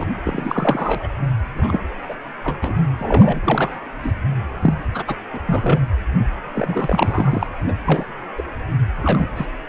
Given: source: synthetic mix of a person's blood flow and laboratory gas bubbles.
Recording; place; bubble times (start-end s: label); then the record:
Doppler ultrasound of blood flow; precordium
0.00-0.04 s: bubbles
0.25-1.07 s: bubbles
1.55-1.83 s: bubbles
2.08-2.15 s: bubbles
2.44-2.59 s: bubbles
2.62-2.80 s: bubbles
2.99-3.40 s: bubbles
3.43-3.72 s: bubbles
4.02-4.12 s: bubbles
4.61-4.73 s: bubbles
4.93-5.04 s: bubbles
5.07-5.16 s: bubbles
5.33-5.39 s: bubbles
5.46-5.79 s: bubbles
6.54-7.47 s: bubbles
7.68-7.72 s: bubbles
7.85-8.04 s: bubbles
8.38-8.43 s: bubbles
9.01-9.31 s: bubbles
9.36-9.46 s: bubbles
From the record:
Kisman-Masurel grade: 232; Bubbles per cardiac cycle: several, 3 to 8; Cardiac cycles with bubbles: 50 to 99%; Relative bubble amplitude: moderate (0.250 to 0.450); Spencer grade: 3 (all of the cardiac periods contain showers or single bubble signals, but not dominating or overriding the cardiac motion signals); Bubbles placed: anywhere in the cardiac cycle